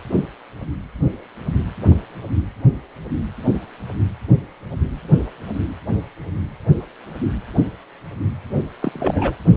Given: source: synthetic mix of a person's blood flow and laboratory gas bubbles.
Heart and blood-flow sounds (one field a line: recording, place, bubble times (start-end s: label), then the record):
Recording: Doppler ultrasound of blood flow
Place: precordium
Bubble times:
8.79-9.35 s: bubbles
From the record:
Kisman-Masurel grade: 212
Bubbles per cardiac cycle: several, 3 to 8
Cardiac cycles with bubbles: 1 to 10%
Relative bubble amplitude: moderate (0.250 to 0.450)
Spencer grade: 1 (occasional bubble signal discernible with the cardiac motion signal, with majority of cardiac periods free of bubbles)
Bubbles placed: only in the low amplitude regions of the cardiac cycle